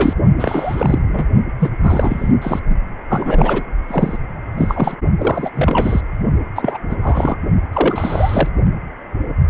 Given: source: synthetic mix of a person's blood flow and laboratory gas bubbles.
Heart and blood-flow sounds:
Doppler ultrasound of blood flow; precordium
0.00-0.14 s: bubbles
0.39-1.27 s: bubbles
1.59-1.70 s: bubbles
1.82-2.32 s: bubbles
2.41-2.59 s: bubbles
3.09-3.63 s: bubbles
3.88-4.17 s: bubbles
4.57-4.96 s: bubbles
5.17-5.50 s: bubbles
5.54-6.01 s: bubbles
6.55-6.77 s: bubbles
6.89-6.96 s: bubbles
7.02-7.36 s: bubbles
7.72-8.48 s: bubbles
From the record:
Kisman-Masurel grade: 333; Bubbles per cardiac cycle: rolling drumbeat, 9 or more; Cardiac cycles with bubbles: 50 to 99%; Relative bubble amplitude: loud (0.450 to 0.775); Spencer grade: 3 (all of the cardiac periods contain showers or single bubble signals, but not dominating or overriding the cardiac motion signals); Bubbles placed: only in the low amplitude regions of the cardiac cycle

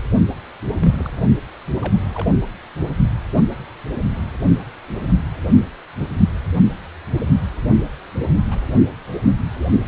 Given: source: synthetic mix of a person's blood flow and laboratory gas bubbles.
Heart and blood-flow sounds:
Doppler ultrasound of blood flow; precordium
0.79-1.10 s: bubbles
1.79-1.99 s: bubbles
2.14-2.28 s: bubbles
8.50-8.59 s: bubbles
From the record:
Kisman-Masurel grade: 121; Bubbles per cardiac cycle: 1 to 2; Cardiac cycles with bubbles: 10 to 50%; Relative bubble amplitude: barely perceptible (0.100 to 0.250); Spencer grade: 2 (many but less than half of the cardiac periods contain bubble signals, singularly or in groups); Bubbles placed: only in the low amplitude regions of the cardiac cycle

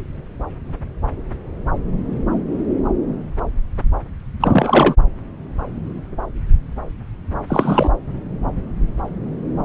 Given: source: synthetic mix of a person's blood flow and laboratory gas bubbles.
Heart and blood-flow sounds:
Doppler ultrasound of blood flow; subclavian vein
4.40-4.95 s: bubbles
7.47-7.90 s: bubbles
From the record:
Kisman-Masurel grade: 223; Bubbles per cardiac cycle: several, 3 to 8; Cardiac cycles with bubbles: 10 to 50%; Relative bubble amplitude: loud (0.450 to 0.775); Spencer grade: 2 (many but less than half of the cardiac periods contain bubble signals, singularly or in groups); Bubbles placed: anywhere in the cardiac cycle

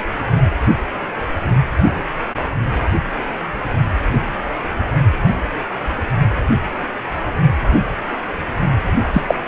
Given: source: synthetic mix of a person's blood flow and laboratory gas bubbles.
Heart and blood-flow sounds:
Doppler ultrasound of blood flow; precordium
9.13-9.24 s: bubbles
9.28-9.40 s: bubbles
From the record:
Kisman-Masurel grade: 123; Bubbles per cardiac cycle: 1 to 2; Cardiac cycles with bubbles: 10 to 50%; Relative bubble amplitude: loud (0.450 to 0.775); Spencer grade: 2 (many but less than half of the cardiac periods contain bubble signals, singularly or in groups); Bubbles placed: only in the low amplitude regions of the cardiac cycle

